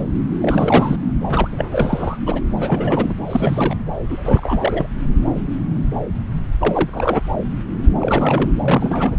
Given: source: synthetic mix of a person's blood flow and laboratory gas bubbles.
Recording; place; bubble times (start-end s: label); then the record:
Doppler ultrasound of blood flow; subclavian vein
0.41-0.97 s: bubbles
1.28-1.48 s: bubbles
1.52-2.18 s: bubbles
2.26-2.41 s: bubbles
2.60-3.12 s: bubbles
3.30-3.75 s: bubbles
4.08-4.87 s: bubbles
6.59-6.89 s: bubbles
6.92-7.22 s: bubbles
7.99-8.49 s: bubbles
8.64-9.17 s: bubbles
From the record:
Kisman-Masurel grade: 332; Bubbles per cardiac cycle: rolling drumbeat, 9 or more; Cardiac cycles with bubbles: 50 to 99%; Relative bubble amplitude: moderate (0.250 to 0.450); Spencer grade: 3 (all of the cardiac periods contain showers or single bubble signals, but not dominating or overriding the cardiac motion signals); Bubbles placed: anywhere in the cardiac cycle